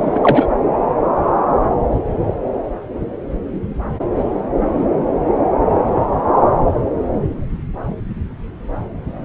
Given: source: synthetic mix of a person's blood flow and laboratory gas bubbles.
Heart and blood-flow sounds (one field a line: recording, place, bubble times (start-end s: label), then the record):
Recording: Doppler ultrasound of blood flow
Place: subclavian vein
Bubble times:
0.00-0.46 s: bubbles
From the record:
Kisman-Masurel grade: 213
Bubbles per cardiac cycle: several, 3 to 8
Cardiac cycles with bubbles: 1 to 10%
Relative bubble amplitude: loud (0.450 to 0.775)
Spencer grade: 1 (occasional bubble signal discernible with the cardiac motion signal, with majority of cardiac periods free of bubbles)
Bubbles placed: anywhere in the cardiac cycle